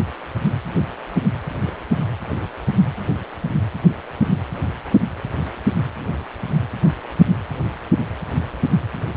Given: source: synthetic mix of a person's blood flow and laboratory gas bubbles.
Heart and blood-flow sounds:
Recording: Doppler ultrasound of blood flow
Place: precordium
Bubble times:
1.67-1.71 s: bubbles
From the record:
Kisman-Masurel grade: 111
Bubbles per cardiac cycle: 1 to 2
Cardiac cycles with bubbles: 1 to 10%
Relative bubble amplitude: barely perceptible (0.100 to 0.250)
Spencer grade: 1 (occasional bubble signal discernible with the cardiac motion signal, with majority of cardiac periods free of bubbles)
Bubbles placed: anywhere in the cardiac cycle

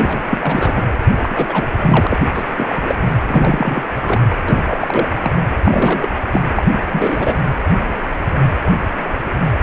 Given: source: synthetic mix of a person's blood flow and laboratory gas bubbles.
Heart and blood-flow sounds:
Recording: Doppler ultrasound of blood flow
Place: precordium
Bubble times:
0.00-0.38 s: bubbles
0.40-0.88 s: bubbles
1.23-1.69 s: bubbles
1.78-2.07 s: bubbles
2.09-2.17 s: bubbles
2.34-2.44 s: bubbles
2.56-2.66 s: bubbles
2.69-2.95 s: bubbles
3.27-3.89 s: bubbles
4.04-4.23 s: bubbles
4.48-5.08 s: bubbles
5.24-5.32 s: bubbles
5.65-6.08 s: bubbles
6.32-6.40 s: bubbles
6.56-6.62 s: bubbles
6.68-6.81 s: bubbles
6.92-7.38 s: bubbles
7.50-7.58 s: bubbles
From the record:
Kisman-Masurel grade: 332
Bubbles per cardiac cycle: rolling drumbeat, 9 or more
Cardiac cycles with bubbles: 50 to 99%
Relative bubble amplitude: moderate (0.250 to 0.450)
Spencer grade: 3 (all of the cardiac periods contain showers or single bubble signals, but not dominating or overriding the cardiac motion signals)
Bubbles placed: anywhere in the cardiac cycle

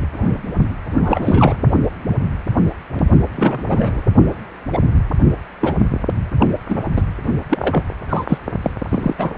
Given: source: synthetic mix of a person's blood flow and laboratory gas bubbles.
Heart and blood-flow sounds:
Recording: Doppler ultrasound of blood flow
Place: precordium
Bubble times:
0.15-0.42 s: bubbles
0.98-1.56 s: bubbles
3.36-4.01 s: bubbles
4.73-4.79 s: bubbles
5.61-5.74 s: bubbles
6.40-6.46 s: bubbles
6.69-6.79 s: bubbles
6.96-7.02 s: bubbles
7.49-7.59 s: bubbles
7.61-7.84 s: bubbles
8.09-8.25 s: bubbles
8.28-8.38 s: bubbles
8.62-8.71 s: bubbles
8.89-9.16 s: bubbles
9.18-9.32 s: bubbles
From the record:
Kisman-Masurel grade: 232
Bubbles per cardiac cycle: several, 3 to 8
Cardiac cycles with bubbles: 50 to 99%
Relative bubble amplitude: moderate (0.250 to 0.450)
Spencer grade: 3 (all of the cardiac periods contain showers or single bubble signals, but not dominating or overriding the cardiac motion signals)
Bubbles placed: only in the low amplitude regions of the cardiac cycle

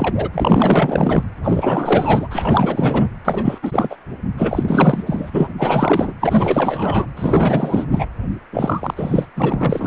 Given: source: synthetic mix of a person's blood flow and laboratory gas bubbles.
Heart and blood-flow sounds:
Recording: Doppler ultrasound of blood flow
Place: precordium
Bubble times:
0.00-0.29 s: bubbles
0.34-1.23 s: bubbles
1.43-2.28 s: bubbles
2.30-3.10 s: bubbles
3.25-3.58 s: bubbles
3.62-3.96 s: bubbles
4.38-5.03 s: bubbles
5.06-5.53 s: bubbles
5.58-6.13 s: bubbles
6.21-7.07 s: bubbles
7.16-7.87 s: bubbles
7.91-8.06 s: bubbles
8.52-8.94 s: bubbles
8.96-9.25 s: bubbles
9.35-9.87 s: bubbles
From the record:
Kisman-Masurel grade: 444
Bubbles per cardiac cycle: continuous sound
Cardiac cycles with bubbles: 100%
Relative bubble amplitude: maximal (0.775 to 0.999)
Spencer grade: 4 (maximum detectable bubble signal sounding continuously throughout systole and diastole of every cardiac period, and overriding the amplitude of the normal cardiac signals)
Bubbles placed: anywhere in the cardiac cycle

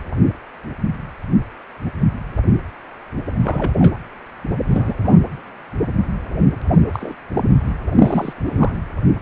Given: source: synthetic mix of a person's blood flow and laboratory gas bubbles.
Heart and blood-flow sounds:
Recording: Doppler ultrasound of blood flow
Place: precordium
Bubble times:
3.25-3.74 s: bubbles
3.78-3.97 s: bubbles
4.67-4.95 s: bubbles
4.97-5.18 s: bubbles
6.93-7.16 s: bubbles
7.33-7.43 s: bubbles
7.92-8.78 s: bubbles
From the record:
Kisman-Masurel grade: 232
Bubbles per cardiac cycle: several, 3 to 8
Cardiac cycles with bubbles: 50 to 99%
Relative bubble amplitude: moderate (0.250 to 0.450)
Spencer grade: 3 (all of the cardiac periods contain showers or single bubble signals, but not dominating or overriding the cardiac motion signals)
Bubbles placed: anywhere in the cardiac cycle

